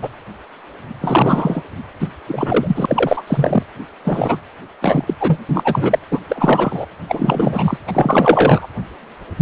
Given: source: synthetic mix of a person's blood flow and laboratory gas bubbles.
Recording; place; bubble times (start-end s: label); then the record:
Doppler ultrasound of blood flow; precordium
0.03-0.09 s: bubbles
1.01-1.62 s: bubbles
2.00-2.08 s: bubbles
2.27-3.22 s: bubbles
3.27-3.63 s: bubbles
4.04-4.38 s: bubbles
4.82-5.13 s: bubbles
5.20-5.38 s: bubbles
5.49-5.99 s: bubbles
6.11-6.19 s: bubbles
6.29-6.86 s: bubbles
7.08-7.78 s: bubbles
7.88-8.68 s: bubbles
From the record:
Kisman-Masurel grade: 333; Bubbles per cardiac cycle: rolling drumbeat, 9 or more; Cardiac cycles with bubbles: 50 to 99%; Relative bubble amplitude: loud (0.450 to 0.775); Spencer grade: 3 (all of the cardiac periods contain showers or single bubble signals, but not dominating or overriding the cardiac motion signals); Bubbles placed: anywhere in the cardiac cycle